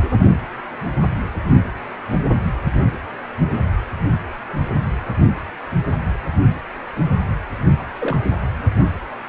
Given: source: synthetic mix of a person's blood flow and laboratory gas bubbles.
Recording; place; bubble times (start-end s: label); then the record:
Doppler ultrasound of blood flow; precordium
7.79-7.85 s: bubbles
7.98-8.18 s: bubbles
From the record:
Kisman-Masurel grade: 211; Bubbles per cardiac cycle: several, 3 to 8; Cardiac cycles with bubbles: 1 to 10%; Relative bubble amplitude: barely perceptible (0.100 to 0.250); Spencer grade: 1 (occasional bubble signal discernible with the cardiac motion signal, with majority of cardiac periods free of bubbles); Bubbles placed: anywhere in the cardiac cycle